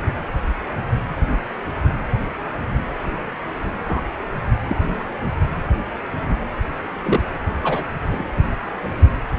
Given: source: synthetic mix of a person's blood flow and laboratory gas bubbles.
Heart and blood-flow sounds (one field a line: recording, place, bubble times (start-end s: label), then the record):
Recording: Doppler ultrasound of blood flow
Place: precordium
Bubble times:
3.88-4.00 s: bubbles
4.67-5.04 s: bubbles
7.03-7.22 s: bubbles
7.63-7.84 s: bubbles
8.12-8.25 s: bubbles
From the record:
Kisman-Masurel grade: 122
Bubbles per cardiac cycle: 1 to 2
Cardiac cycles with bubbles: 10 to 50%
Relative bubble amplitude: moderate (0.250 to 0.450)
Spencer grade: 2 (many but less than half of the cardiac periods contain bubble signals, singularly or in groups)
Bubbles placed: anywhere in the cardiac cycle